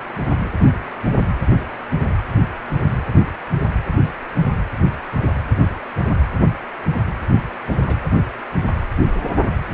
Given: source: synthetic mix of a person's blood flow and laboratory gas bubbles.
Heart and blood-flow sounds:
Doppler ultrasound of blood flow; precordium
7.86-7.96 s: bubbles
From the record:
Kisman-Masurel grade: 121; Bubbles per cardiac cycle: 1 to 2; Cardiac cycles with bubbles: 10 to 50%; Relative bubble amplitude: barely perceptible (0.100 to 0.250); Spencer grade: 2 (many but less than half of the cardiac periods contain bubble signals, singularly or in groups); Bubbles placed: anywhere in the cardiac cycle

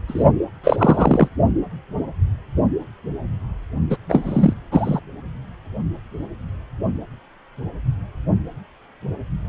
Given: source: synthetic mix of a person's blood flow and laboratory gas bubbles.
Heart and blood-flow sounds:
Doppler ultrasound of blood flow; precordium
0.08-0.24 s: bubbles
0.64-1.28 s: bubbles
3.90-3.97 s: bubbles
4.09-4.53 s: bubbles
4.71-5.00 s: bubbles
From the record:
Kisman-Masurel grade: 223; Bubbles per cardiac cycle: several, 3 to 8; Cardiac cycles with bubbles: 10 to 50%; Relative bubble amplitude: loud (0.450 to 0.775); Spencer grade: 2 (many but less than half of the cardiac periods contain bubble signals, singularly or in groups); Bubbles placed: only in the low amplitude regions of the cardiac cycle

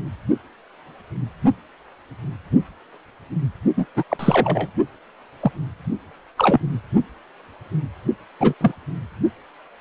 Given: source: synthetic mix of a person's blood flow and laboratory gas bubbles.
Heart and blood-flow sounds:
Doppler ultrasound of blood flow; precordium
3.77-3.86 s: bubbles
3.96-4.03 s: bubbles
4.09-4.69 s: bubbles
5.40-5.51 s: bubbles
6.38-6.60 s: bubbles
8.40-8.54 s: bubbles
8.61-8.71 s: bubbles
From the record:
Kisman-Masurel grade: 223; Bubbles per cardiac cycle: several, 3 to 8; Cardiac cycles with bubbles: 10 to 50%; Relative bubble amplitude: loud (0.450 to 0.775); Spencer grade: 2 (many but less than half of the cardiac periods contain bubble signals, singularly or in groups); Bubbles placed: only in the low amplitude regions of the cardiac cycle

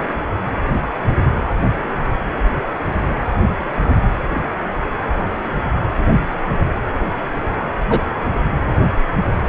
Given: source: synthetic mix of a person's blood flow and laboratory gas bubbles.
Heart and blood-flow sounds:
Doppler ultrasound of blood flow; precordium
7.88-8.02 s: bubbles
From the record:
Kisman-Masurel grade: 113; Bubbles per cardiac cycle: 1 to 2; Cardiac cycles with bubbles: 1 to 10%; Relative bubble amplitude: loud (0.450 to 0.775); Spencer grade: 1 (occasional bubble signal discernible with the cardiac motion signal, with majority of cardiac periods free of bubbles); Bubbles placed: anywhere in the cardiac cycle

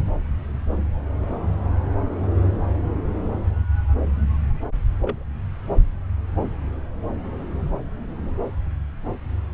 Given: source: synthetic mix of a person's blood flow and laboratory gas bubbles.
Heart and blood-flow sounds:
Doppler ultrasound of blood flow; subclavian vein
5.00-5.23 s: bubbles
From the record:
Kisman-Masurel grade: 121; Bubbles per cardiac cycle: 1 to 2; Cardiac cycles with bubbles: 10 to 50%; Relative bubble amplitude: barely perceptible (0.100 to 0.250); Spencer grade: 2 (many but less than half of the cardiac periods contain bubble signals, singularly or in groups); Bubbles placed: anywhere in the cardiac cycle

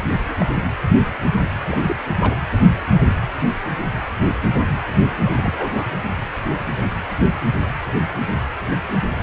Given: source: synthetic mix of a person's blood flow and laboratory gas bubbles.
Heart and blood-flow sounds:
Doppler ultrasound of blood flow; precordium
0.00-0.04 s: bubbles
0.10-0.17 s: bubbles
0.24-0.36 s: bubbles
0.40-0.45 s: bubbles
1.67-1.95 s: bubbles
2.19-2.35 s: bubbles
5.25-5.87 s: bubbles
From the record:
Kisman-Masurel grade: 221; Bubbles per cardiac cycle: several, 3 to 8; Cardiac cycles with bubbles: 10 to 50%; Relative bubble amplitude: barely perceptible (0.100 to 0.250); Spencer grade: 2 (many but less than half of the cardiac periods contain bubble signals, singularly or in groups); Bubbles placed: anywhere in the cardiac cycle

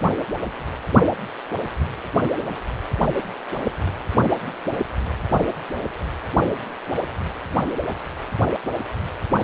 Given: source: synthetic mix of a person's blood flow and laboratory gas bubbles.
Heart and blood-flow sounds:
Doppler ultrasound of blood flow; precordium
no bubbles
From the record:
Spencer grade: 0 (complete lack of bubble signals)

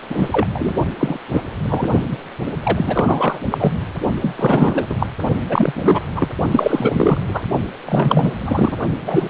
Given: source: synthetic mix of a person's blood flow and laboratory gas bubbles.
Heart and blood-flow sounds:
Doppler ultrasound of blood flow; precordium
0.09-0.28 s: bubbles
0.31-0.46 s: bubbles
0.54-0.77 s: bubbles
0.99-1.19 s: bubbles
1.33-1.43 s: bubbles
1.65-1.92 s: bubbles
2.10-2.17 s: bubbles
2.63-3.39 s: bubbles
3.50-3.73 s: bubbles
4.21-4.87 s: bubbles
4.89-4.95 s: bubbles
4.98-5.06 s: bubbles
5.49-6.01 s: bubbles
6.15-6.28 s: bubbles
6.51-7.21 s: bubbles
7.28-7.45 s: bubbles
7.86-8.32 s: bubbles
8.40-8.79 s: bubbles
9.02-9.30 s: bubbles
From the record:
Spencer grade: 3 (all of the cardiac periods contain showers or single bubble signals, but not dominating or overriding the cardiac motion signals); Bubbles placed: only in the low amplitude regions of the cardiac cycle

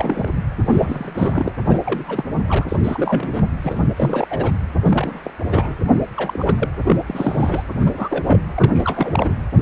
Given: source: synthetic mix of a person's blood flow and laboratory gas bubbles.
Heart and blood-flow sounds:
Doppler ultrasound of blood flow; precordium
0.00-0.29 s: bubbles
0.63-1.52 s: bubbles
1.67-1.79 s: bubbles
1.84-2.24 s: bubbles
2.46-2.65 s: bubbles
2.69-2.76 s: bubbles
2.83-3.44 s: bubbles
3.61-3.87 s: bubbles
3.96-4.25 s: bubbles
4.30-4.51 s: bubbles
4.84-5.31 s: bubbles
5.47-5.75 s: bubbles
5.84-5.96 s: bubbles
6.16-6.71 s: bubbles
6.84-6.96 s: bubbles
7.06-7.63 s: bubbles
7.79-8.39 s: bubbles
8.54-9.34 s: bubbles
9.57-9.61 s: bubbles
From the record:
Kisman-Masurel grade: 342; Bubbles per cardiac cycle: rolling drumbeat, 9 or more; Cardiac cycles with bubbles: 100%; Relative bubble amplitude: moderate (0.250 to 0.450); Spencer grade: 3 (all of the cardiac periods contain showers or single bubble signals, but not dominating or overriding the cardiac motion signals); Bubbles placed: anywhere in the cardiac cycle

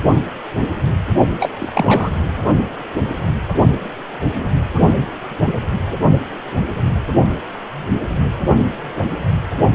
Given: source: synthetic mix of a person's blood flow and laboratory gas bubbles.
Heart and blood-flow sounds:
Doppler ultrasound of blood flow; precordium
1.40-2.11 s: bubbles
From the record:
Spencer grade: 1 (occasional bubble signal discernible with the cardiac motion signal, with majority of cardiac periods free of bubbles); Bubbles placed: only in the low amplitude regions of the cardiac cycle

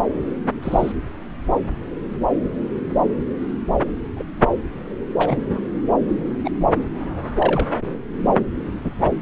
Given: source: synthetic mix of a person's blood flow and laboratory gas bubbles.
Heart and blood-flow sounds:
Doppler ultrasound of blood flow; subclavian vein
0.62-0.92 s: bubbles
4.15-4.24 s: bubbles
5.15-5.39 s: bubbles
6.44-6.50 s: bubbles
7.38-7.68 s: bubbles
8.84-8.94 s: bubbles
9.02-9.11 s: bubbles
From the record:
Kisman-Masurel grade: 122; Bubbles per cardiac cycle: 1 to 2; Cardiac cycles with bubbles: 10 to 50%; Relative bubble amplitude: moderate (0.250 to 0.450); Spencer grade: 2 (many but less than half of the cardiac periods contain bubble signals, singularly or in groups); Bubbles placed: anywhere in the cardiac cycle

